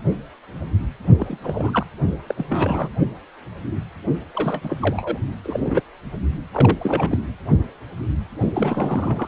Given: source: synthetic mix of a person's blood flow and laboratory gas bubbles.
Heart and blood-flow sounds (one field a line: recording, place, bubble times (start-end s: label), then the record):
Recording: Doppler ultrasound of blood flow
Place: precordium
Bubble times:
1.18-1.38 s: bubbles
1.42-1.85 s: bubbles
2.27-2.34 s: bubbles
2.38-2.46 s: bubbles
2.49-2.91 s: bubbles
4.33-4.77 s: bubbles
4.82-5.19 s: bubbles
5.44-5.83 s: bubbles
6.52-7.19 s: bubbles
8.54-9.28 s: bubbles
From the record:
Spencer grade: 3 (all of the cardiac periods contain showers or single bubble signals, but not dominating or overriding the cardiac motion signals)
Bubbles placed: only in the low amplitude regions of the cardiac cycle